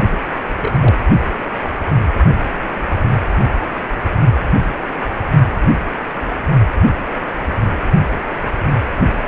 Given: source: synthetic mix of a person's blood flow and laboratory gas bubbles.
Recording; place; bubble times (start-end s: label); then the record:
Doppler ultrasound of blood flow; precordium
0.11-0.18 s: bubbles
0.61-0.78 s: bubbles
0.81-0.95 s: bubbles
From the record:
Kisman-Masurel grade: 221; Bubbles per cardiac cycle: several, 3 to 8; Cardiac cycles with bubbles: 10 to 50%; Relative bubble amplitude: barely perceptible (0.100 to 0.250); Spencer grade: 2 (many but less than half of the cardiac periods contain bubble signals, singularly or in groups); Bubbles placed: only in the low amplitude regions of the cardiac cycle